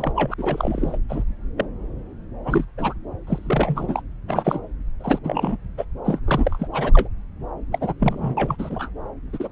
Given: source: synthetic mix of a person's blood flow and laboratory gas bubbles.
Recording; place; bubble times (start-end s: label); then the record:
Doppler ultrasound of blood flow; subclavian vein
0.00-0.13 s: bubbles
0.16-0.34 s: bubbles
0.38-0.98 s: bubbles
1.08-1.23 s: bubbles
1.58-1.65 s: bubbles
2.44-2.65 s: bubbles
2.77-2.94 s: bubbles
3.27-4.01 s: bubbles
4.27-4.60 s: bubbles
5.00-5.19 s: bubbles
5.23-5.57 s: bubbles
5.77-5.85 s: bubbles
6.04-6.19 s: bubbles
6.25-6.68 s: bubbles
6.72-7.08 s: bubbles
7.72-7.93 s: bubbles
8.00-8.56 s: bubbles
8.59-8.90 s: bubbles
9.33-9.49 s: bubbles
From the record:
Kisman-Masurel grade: 242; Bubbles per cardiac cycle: several, 3 to 8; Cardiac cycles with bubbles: 100%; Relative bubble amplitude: moderate (0.250 to 0.450); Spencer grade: 3 (all of the cardiac periods contain showers or single bubble signals, but not dominating or overriding the cardiac motion signals); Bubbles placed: anywhere in the cardiac cycle